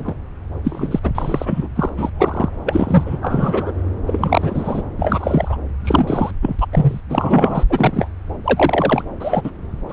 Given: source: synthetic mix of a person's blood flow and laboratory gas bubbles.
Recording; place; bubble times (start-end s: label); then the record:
Doppler ultrasound of blood flow; subclavian vein
0.00-0.14 s: bubbles
0.64-0.99 s: bubbles
1.03-1.11 s: bubbles
1.15-1.69 s: bubbles
1.75-1.90 s: bubbles
1.97-2.10 s: bubbles
2.19-2.49 s: bubbles
2.66-3.18 s: bubbles
3.22-3.72 s: bubbles
4.07-4.82 s: bubbles
4.98-5.57 s: bubbles
5.84-6.31 s: bubbles
6.42-6.56 s: bubbles
6.59-6.66 s: bubbles
6.72-7.00 s: bubbles
7.09-7.64 s: bubbles
7.69-8.10 s: bubbles
8.44-9.04 s: bubbles
9.19-9.41 s: bubbles
9.43-9.50 s: bubbles
9.89-9.93 s: bubbles
From the record:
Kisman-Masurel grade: 243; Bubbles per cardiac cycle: several, 3 to 8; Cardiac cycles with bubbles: 100%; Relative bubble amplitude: loud (0.450 to 0.775); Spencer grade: 3 (all of the cardiac periods contain showers or single bubble signals, but not dominating or overriding the cardiac motion signals); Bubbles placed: anywhere in the cardiac cycle